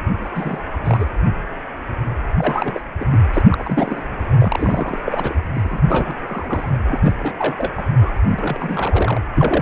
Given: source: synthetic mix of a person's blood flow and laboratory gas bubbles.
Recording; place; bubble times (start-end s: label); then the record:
Doppler ultrasound of blood flow; precordium
0.24-0.29 s: bubbles
0.35-0.61 s: bubbles
0.72-1.06 s: bubbles
2.36-2.81 s: bubbles
3.00-3.19 s: bubbles
3.33-3.42 s: bubbles
3.50-4.02 s: bubbles
4.38-4.99 s: bubbles
5.06-5.33 s: bubbles
5.54-6.15 s: bubbles
6.26-6.71 s: bubbles
6.88-7.12 s: bubbles
7.19-7.54 s: bubbles
7.58-7.71 s: bubbles
7.77-7.82 s: bubbles
8.01-8.12 s: bubbles
8.23-9.22 s: bubbles
9.34-9.62 s: bubbles
From the record:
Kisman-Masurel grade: 332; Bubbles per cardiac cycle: rolling drumbeat, 9 or more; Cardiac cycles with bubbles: 50 to 99%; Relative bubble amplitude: moderate (0.250 to 0.450); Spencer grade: 3 (all of the cardiac periods contain showers or single bubble signals, but not dominating or overriding the cardiac motion signals); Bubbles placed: anywhere in the cardiac cycle